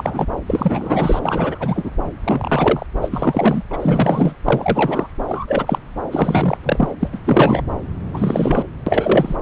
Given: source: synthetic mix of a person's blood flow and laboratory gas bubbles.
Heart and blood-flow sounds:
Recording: Doppler ultrasound of blood flow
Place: subclavian vein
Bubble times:
0.00-0.26 s: bubbles
0.46-1.91 s: bubbles
2.24-2.86 s: bubbles
3.02-3.63 s: bubbles
3.71-4.34 s: bubbles
4.45-5.08 s: bubbles
5.27-5.79 s: bubbles
6.11-6.58 s: bubbles
6.63-6.94 s: bubbles
7.00-7.08 s: bubbles
7.12-7.19 s: bubbles
7.25-7.62 s: bubbles
8.13-8.63 s: bubbles
8.86-9.36 s: bubbles
From the record:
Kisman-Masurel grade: 343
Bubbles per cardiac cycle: rolling drumbeat, 9 or more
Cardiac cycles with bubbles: 100%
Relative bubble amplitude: loud (0.450 to 0.775)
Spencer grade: 3 (all of the cardiac periods contain showers or single bubble signals, but not dominating or overriding the cardiac motion signals)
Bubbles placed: anywhere in the cardiac cycle

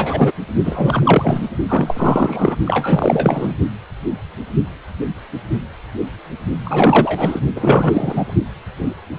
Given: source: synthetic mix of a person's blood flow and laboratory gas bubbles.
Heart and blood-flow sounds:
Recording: Doppler ultrasound of blood flow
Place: precordium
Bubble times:
0.00-0.32 s: bubbles
0.64-1.48 s: bubbles
1.68-2.56 s: bubbles
2.65-3.54 s: bubbles
6.66-7.41 s: bubbles
7.55-8.34 s: bubbles
From the record:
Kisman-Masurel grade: 333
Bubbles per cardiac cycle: rolling drumbeat, 9 or more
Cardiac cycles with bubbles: 50 to 99%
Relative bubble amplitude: loud (0.450 to 0.775)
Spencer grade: 3 (all of the cardiac periods contain showers or single bubble signals, but not dominating or overriding the cardiac motion signals)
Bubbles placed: only in the low amplitude regions of the cardiac cycle

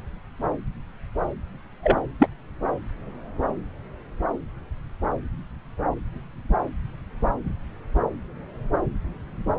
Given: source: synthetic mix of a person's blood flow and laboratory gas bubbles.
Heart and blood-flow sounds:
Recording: Doppler ultrasound of blood flow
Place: subclavian vein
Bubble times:
1.83-1.99 s: bubbles
2.19-2.27 s: bubbles
From the record:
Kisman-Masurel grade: 113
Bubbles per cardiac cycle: 1 to 2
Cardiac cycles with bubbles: 1 to 10%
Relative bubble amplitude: loud (0.450 to 0.775)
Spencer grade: 1 (occasional bubble signal discernible with the cardiac motion signal, with majority of cardiac periods free of bubbles)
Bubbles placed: anywhere in the cardiac cycle

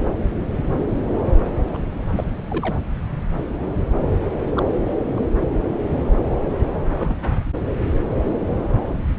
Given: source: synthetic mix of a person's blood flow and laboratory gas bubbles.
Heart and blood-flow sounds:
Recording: Doppler ultrasound of blood flow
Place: subclavian vein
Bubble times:
0.00-0.07 s: bubbles
1.74-1.77 s: bubbles
2.15-2.24 s: bubbles
2.49-2.75 s: bubbles
4.54-4.65 s: bubbles
5.16-5.25 s: bubbles
6.96-7.17 s: bubbles
8.12-8.34 s: bubbles
From the record:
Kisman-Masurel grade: 121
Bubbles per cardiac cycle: 1 to 2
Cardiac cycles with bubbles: 10 to 50%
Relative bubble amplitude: barely perceptible (0.100 to 0.250)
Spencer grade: 2 (many but less than half of the cardiac periods contain bubble signals, singularly or in groups)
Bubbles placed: anywhere in the cardiac cycle

